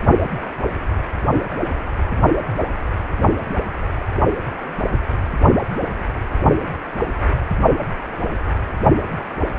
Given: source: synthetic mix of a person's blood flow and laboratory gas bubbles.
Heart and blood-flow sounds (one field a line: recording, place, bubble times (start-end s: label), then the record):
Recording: Doppler ultrasound of blood flow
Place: precordium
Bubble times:
5.70-5.77 s: bubbles
5.99-6.15 s: bubbles
From the record:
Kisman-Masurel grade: 111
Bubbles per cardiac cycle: 1 to 2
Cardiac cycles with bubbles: 1 to 10%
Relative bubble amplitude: barely perceptible (0.100 to 0.250)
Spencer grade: 1 (occasional bubble signal discernible with the cardiac motion signal, with majority of cardiac periods free of bubbles)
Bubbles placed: only in the low amplitude regions of the cardiac cycle